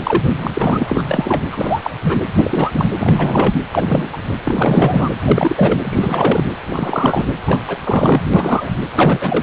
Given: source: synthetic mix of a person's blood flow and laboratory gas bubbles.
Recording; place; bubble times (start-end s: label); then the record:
Doppler ultrasound of blood flow; precordium
0.03-0.22 s: bubbles
0.36-1.02 s: bubbles
1.06-1.49 s: bubbles
1.52-1.91 s: bubbles
2.02-2.18 s: bubbles
2.35-2.71 s: bubbles
2.73-2.92 s: bubbles
3.00-3.52 s: bubbles
3.72-4.09 s: bubbles
4.12-4.18 s: bubbles
4.44-5.09 s: bubbles
5.22-5.79 s: bubbles
5.83-6.47 s: bubbles
6.69-7.25 s: bubbles
7.46-7.60 s: bubbles
7.67-7.77 s: bubbles
7.83-8.21 s: bubbles
8.34-8.71 s: bubbles
8.95-9.43 s: bubbles
From the record:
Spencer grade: 3 (all of the cardiac periods contain showers or single bubble signals, but not dominating or overriding the cardiac motion signals); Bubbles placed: anywhere in the cardiac cycle